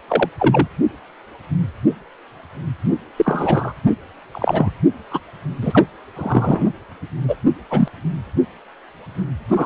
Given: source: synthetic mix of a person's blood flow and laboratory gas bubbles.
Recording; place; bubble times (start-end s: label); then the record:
Doppler ultrasound of blood flow; precordium
0.08-0.29 s: bubbles
0.39-0.68 s: bubbles
3.17-3.73 s: bubbles
4.32-4.71 s: bubbles
5.11-5.20 s: bubbles
5.62-5.86 s: bubbles
6.16-6.72 s: bubbles
7.28-7.36 s: bubbles
7.70-7.88 s: bubbles
9.51-9.66 s: bubbles
From the record:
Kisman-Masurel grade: 233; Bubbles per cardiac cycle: several, 3 to 8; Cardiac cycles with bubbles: 50 to 99%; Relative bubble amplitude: loud (0.450 to 0.775); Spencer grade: 3 (all of the cardiac periods contain showers or single bubble signals, but not dominating or overriding the cardiac motion signals); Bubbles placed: anywhere in the cardiac cycle